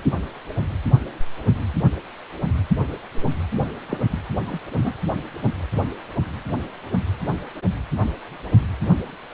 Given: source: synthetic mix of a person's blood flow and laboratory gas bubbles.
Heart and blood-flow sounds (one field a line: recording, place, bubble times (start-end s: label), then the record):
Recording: Doppler ultrasound of blood flow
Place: precordium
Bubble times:
3.89-3.98 s: bubbles
4.10-4.19 s: bubbles
4.46-4.60 s: bubbles
4.75-4.93 s: bubbles
From the record:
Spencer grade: 1 (occasional bubble signal discernible with the cardiac motion signal, with majority of cardiac periods free of bubbles)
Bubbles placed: anywhere in the cardiac cycle